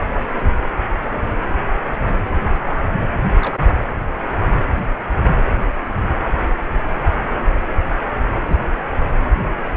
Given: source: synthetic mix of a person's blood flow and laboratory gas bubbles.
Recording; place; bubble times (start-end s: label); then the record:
Doppler ultrasound of blood flow; precordium
1.49-1.53 s: bubbles
2.02-2.12 s: bubbles
3.42-3.60 s: bubbles
8.13-8.34 s: bubbles
8.46-8.57 s: bubbles
From the record:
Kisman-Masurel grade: 121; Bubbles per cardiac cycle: 1 to 2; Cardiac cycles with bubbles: 10 to 50%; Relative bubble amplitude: barely perceptible (0.100 to 0.250); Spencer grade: 2 (many but less than half of the cardiac periods contain bubble signals, singularly or in groups); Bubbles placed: anywhere in the cardiac cycle